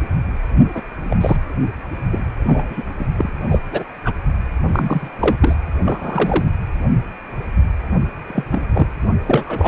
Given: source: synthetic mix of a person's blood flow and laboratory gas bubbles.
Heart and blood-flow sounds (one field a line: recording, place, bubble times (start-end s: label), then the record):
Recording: Doppler ultrasound of blood flow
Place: precordium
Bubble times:
0.74-0.82 s: bubbles
1.09-1.16 s: bubbles
1.20-1.36 s: bubbles
1.92-2.33 s: bubbles
2.42-2.83 s: bubbles
2.99-3.06 s: bubbles
3.17-3.32 s: bubbles
3.49-3.59 s: bubbles
3.71-3.84 s: bubbles
4.04-4.13 s: bubbles
4.66-5.08 s: bubbles
5.20-5.36 s: bubbles
5.41-5.54 s: bubbles
5.83-6.45 s: bubbles
8.26-8.43 s: bubbles
8.51-8.61 s: bubbles
8.72-8.87 s: bubbles
9.26-9.68 s: bubbles
From the record:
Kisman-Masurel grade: 232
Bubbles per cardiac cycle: several, 3 to 8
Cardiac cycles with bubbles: 50 to 99%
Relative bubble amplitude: moderate (0.250 to 0.450)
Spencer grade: 3 (all of the cardiac periods contain showers or single bubble signals, but not dominating or overriding the cardiac motion signals)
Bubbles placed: anywhere in the cardiac cycle